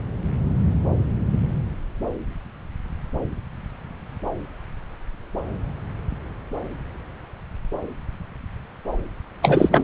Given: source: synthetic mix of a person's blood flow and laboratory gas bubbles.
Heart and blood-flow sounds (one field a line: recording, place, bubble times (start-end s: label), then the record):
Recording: Doppler ultrasound of blood flow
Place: subclavian vein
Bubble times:
9.42-9.84 s: bubbles
From the record:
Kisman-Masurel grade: 223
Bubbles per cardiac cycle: several, 3 to 8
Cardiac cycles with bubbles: 10 to 50%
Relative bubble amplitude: loud (0.450 to 0.775)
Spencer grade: 2 (many but less than half of the cardiac periods contain bubble signals, singularly or in groups)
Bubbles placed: anywhere in the cardiac cycle